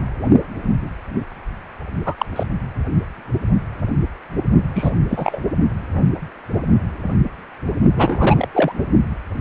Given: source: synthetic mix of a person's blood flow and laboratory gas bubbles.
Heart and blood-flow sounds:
Doppler ultrasound of blood flow; precordium
2.05-2.15 s: bubbles
2.18-2.25 s: bubbles
2.35-2.44 s: bubbles
4.75-4.94 s: bubbles
5.08-5.41 s: bubbles
7.96-8.48 s: bubbles
8.53-8.72 s: bubbles
From the record:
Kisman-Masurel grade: 223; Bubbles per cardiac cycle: several, 3 to 8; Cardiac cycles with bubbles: 10 to 50%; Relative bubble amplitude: loud (0.450 to 0.775); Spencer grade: 2 (many but less than half of the cardiac periods contain bubble signals, singularly or in groups); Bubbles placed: only in the low amplitude regions of the cardiac cycle

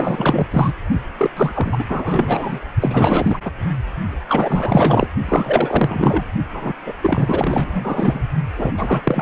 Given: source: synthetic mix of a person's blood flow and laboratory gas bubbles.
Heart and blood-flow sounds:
Doppler ultrasound of blood flow; precordium
0.00-0.48 s: bubbles
0.50-0.72 s: bubbles
1.18-1.30 s: bubbles
1.36-1.84 s: bubbles
1.88-2.59 s: bubbles
2.81-3.40 s: bubbles
3.44-3.52 s: bubbles
4.28-5.07 s: bubbles
5.29-6.24 s: bubbles
6.53-6.72 s: bubbles
6.86-6.94 s: bubbles
7.01-8.23 s: bubbles
8.57-8.72 s: bubbles
8.77-9.22 s: bubbles
From the record:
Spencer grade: 4 (maximum detectable bubble signal sounding continuously throughout systole and diastole of every cardiac period, and overriding the amplitude of the normal cardiac signals); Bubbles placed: only in the low amplitude regions of the cardiac cycle

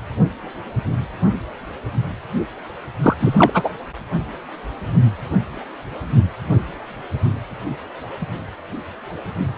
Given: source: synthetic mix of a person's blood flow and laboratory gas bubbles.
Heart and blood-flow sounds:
Doppler ultrasound of blood flow; precordium
3.02-3.15 s: bubbles
3.19-3.69 s: bubbles
From the record:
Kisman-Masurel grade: 213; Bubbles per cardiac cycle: several, 3 to 8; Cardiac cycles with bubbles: 1 to 10%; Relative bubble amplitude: loud (0.450 to 0.775); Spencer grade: 1 (occasional bubble signal discernible with the cardiac motion signal, with majority of cardiac periods free of bubbles); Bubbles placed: anywhere in the cardiac cycle

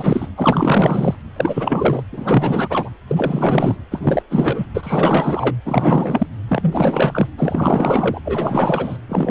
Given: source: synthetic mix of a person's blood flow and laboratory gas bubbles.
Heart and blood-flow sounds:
Doppler ultrasound of blood flow; precordium
0.00-0.28 s: bubbles
0.37-1.15 s: bubbles
1.36-2.03 s: bubbles
2.12-2.90 s: bubbles
3.07-3.77 s: bubbles
3.91-4.23 s: bubbles
4.30-4.67 s: bubbles
4.74-5.56 s: bubbles
5.66-6.27 s: bubbles
6.49-7.27 s: bubbles
7.38-8.21 s: bubbles
8.25-8.98 s: bubbles
9.08-9.31 s: bubbles
From the record:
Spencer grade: 4 (maximum detectable bubble signal sounding continuously throughout systole and diastole of every cardiac period, and overriding the amplitude of the normal cardiac signals); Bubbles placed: anywhere in the cardiac cycle

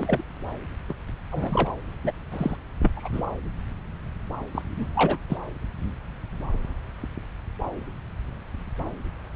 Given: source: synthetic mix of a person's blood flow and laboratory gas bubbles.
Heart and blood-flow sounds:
Doppler ultrasound of blood flow; subclavian vein
0.00-0.24 s: bubbles
0.89-0.93 s: bubbles
1.31-1.75 s: bubbles
2.04-2.11 s: bubbles
2.31-2.56 s: bubbles
2.83-2.92 s: bubbles
2.96-3.08 s: bubbles
3.12-3.22 s: bubbles
4.54-4.62 s: bubbles
4.75-4.85 s: bubbles
4.95-5.17 s: bubbles
5.29-5.38 s: bubbles
From the record:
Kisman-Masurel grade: 221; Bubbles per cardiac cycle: several, 3 to 8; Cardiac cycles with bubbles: 10 to 50%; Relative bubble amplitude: barely perceptible (0.100 to 0.250); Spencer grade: 2 (many but less than half of the cardiac periods contain bubble signals, singularly or in groups); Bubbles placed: anywhere in the cardiac cycle

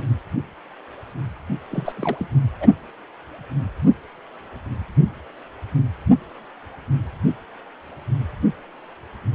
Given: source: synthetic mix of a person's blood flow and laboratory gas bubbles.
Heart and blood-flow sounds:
Doppler ultrasound of blood flow; precordium
1.71-1.93 s: bubbles
1.97-2.26 s: bubbles
2.60-2.68 s: bubbles
From the record:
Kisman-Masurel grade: 221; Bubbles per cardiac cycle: several, 3 to 8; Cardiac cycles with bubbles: 10 to 50%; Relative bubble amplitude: barely perceptible (0.100 to 0.250); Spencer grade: 2 (many but less than half of the cardiac periods contain bubble signals, singularly or in groups); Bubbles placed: anywhere in the cardiac cycle

